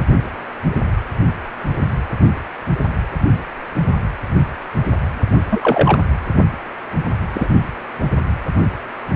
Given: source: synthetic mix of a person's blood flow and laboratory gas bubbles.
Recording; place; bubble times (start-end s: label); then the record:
Doppler ultrasound of blood flow; precordium
5.50-5.97 s: bubbles
7.34-7.47 s: bubbles
From the record:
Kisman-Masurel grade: 123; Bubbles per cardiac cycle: 1 to 2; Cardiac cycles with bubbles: 10 to 50%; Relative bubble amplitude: loud (0.450 to 0.775); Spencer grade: 2 (many but less than half of the cardiac periods contain bubble signals, singularly or in groups); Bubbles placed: anywhere in the cardiac cycle